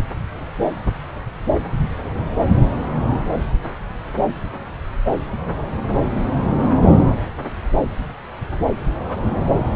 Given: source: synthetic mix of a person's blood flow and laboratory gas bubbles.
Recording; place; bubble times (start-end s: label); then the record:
Doppler ultrasound of blood flow; subclavian vein
6.34-6.64 s: bubbles
From the record:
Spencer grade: 1 (occasional bubble signal discernible with the cardiac motion signal, with majority of cardiac periods free of bubbles); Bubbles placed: anywhere in the cardiac cycle